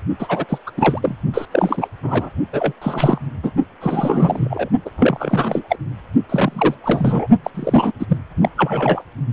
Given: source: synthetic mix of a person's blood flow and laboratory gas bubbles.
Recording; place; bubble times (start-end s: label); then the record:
Doppler ultrasound of blood flow; precordium
0.19-0.46 s: bubbles
0.49-0.58 s: bubbles
0.67-0.71 s: bubbles
0.77-1.17 s: bubbles
1.33-1.46 s: bubbles
1.51-1.88 s: bubbles
2.03-2.29 s: bubbles
2.52-2.73 s: bubbles
2.81-3.18 s: bubbles
3.43-3.51 s: bubbles
3.81-4.69 s: bubbles
4.85-4.90 s: bubbles
4.96-5.62 s: bubbles
5.69-5.76 s: bubbles
6.29-6.75 s: bubbles
6.83-7.27 s: bubbles
7.44-7.50 s: bubbles
7.54-7.92 s: bubbles
7.99-8.06 s: bubbles
8.09-8.18 s: bubbles
8.42-8.49 s: bubbles
8.56-9.04 s: bubbles
From the record:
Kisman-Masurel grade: 343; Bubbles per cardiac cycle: rolling drumbeat, 9 or more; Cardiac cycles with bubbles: 100%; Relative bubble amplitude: loud (0.450 to 0.775); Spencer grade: 3 (all of the cardiac periods contain showers or single bubble signals, but not dominating or overriding the cardiac motion signals); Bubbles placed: only in the low amplitude regions of the cardiac cycle